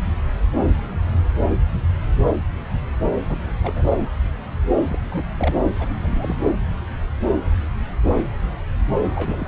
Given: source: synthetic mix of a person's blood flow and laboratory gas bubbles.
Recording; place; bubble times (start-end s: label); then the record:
Doppler ultrasound of blood flow; subclavian vein
3.18-3.43 s: bubbles
3.61-3.84 s: bubbles
4.88-4.98 s: bubbles
5.11-5.25 s: bubbles
5.38-5.54 s: bubbles
5.79-5.88 s: bubbles
6.02-6.07 s: bubbles
6.17-6.35 s: bubbles
9.11-9.48 s: bubbles
From the record:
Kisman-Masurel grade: 221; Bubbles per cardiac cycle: several, 3 to 8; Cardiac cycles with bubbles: 10 to 50%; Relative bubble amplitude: barely perceptible (0.100 to 0.250); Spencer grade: 2 (many but less than half of the cardiac periods contain bubble signals, singularly or in groups); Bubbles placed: anywhere in the cardiac cycle